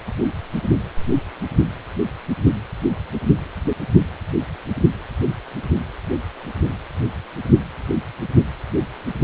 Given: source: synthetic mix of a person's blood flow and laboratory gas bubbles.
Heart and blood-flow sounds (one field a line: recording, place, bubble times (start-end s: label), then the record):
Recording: Doppler ultrasound of blood flow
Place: precordium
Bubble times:
no bubbles
From the record:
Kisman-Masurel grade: 000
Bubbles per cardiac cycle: 0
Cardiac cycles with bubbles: 0%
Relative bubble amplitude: no bubbles discernible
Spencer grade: 0 (complete lack of bubble signals)